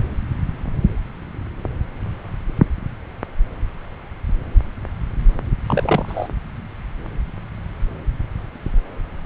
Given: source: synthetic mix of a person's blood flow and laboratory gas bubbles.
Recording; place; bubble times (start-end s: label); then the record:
Doppler ultrasound of blood flow; subclavian vein
5.67-6.28 s: bubbles
From the record:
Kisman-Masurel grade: 212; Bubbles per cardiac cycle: several, 3 to 8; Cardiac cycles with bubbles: 1 to 10%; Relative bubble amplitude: moderate (0.250 to 0.450); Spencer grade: 1 (occasional bubble signal discernible with the cardiac motion signal, with majority of cardiac periods free of bubbles); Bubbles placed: anywhere in the cardiac cycle